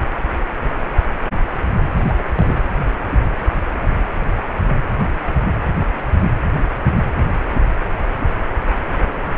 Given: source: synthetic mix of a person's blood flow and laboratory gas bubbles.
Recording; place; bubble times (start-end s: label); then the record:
Doppler ultrasound of blood flow; precordium
1.97-2.15 s: bubbles
2.18-2.22 s: bubbles
2.36-2.63 s: bubbles
From the record:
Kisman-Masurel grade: 211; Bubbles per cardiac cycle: several, 3 to 8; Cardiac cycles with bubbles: 1 to 10%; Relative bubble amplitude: barely perceptible (0.100 to 0.250); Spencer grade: 1 (occasional bubble signal discernible with the cardiac motion signal, with majority of cardiac periods free of bubbles); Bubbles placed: anywhere in the cardiac cycle